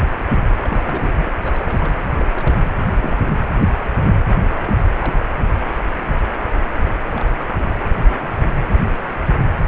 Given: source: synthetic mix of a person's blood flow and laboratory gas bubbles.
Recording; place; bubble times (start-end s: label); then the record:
Doppler ultrasound of blood flow; precordium
0.64-1.32 s: bubbles
1.38-1.94 s: bubbles
2.20-2.26 s: bubbles
2.33-2.67 s: bubbles
2.81-3.16 s: bubbles
3.19-3.31 s: bubbles
4.62-4.73 s: bubbles
4.88-5.17 s: bubbles
5.21-5.25 s: bubbles
5.36-5.41 s: bubbles
7.11-7.29 s: bubbles
7.38-7.58 s: bubbles
7.92-8.28 s: bubbles
8.48-8.55 s: bubbles
From the record:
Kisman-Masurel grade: 221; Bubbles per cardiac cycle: several, 3 to 8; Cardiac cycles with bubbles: 10 to 50%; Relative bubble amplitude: barely perceptible (0.100 to 0.250); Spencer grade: 2 (many but less than half of the cardiac periods contain bubble signals, singularly or in groups); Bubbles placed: anywhere in the cardiac cycle